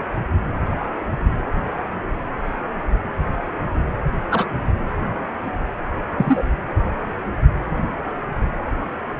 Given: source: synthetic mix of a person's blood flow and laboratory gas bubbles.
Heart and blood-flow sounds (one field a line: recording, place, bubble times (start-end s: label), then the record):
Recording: Doppler ultrasound of blood flow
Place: precordium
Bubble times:
4.31-4.47 s: bubbles
6.17-6.43 s: bubbles
From the record:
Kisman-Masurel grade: 123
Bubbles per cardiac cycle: 1 to 2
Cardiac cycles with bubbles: 10 to 50%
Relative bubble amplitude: loud (0.450 to 0.775)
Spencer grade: 2 (many but less than half of the cardiac periods contain bubble signals, singularly or in groups)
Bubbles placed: anywhere in the cardiac cycle